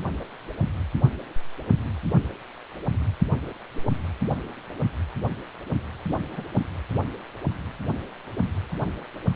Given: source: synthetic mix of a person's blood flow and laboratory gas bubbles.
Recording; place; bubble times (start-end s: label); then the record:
Doppler ultrasound of blood flow; precordium
0.20-0.24 s: bubbles
6.08-6.17 s: bubbles
6.32-6.43 s: bubbles
From the record:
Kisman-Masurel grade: 121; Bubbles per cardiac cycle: 1 to 2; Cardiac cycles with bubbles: 10 to 50%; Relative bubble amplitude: barely perceptible (0.100 to 0.250); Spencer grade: 2 (many but less than half of the cardiac periods contain bubble signals, singularly or in groups); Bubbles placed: anywhere in the cardiac cycle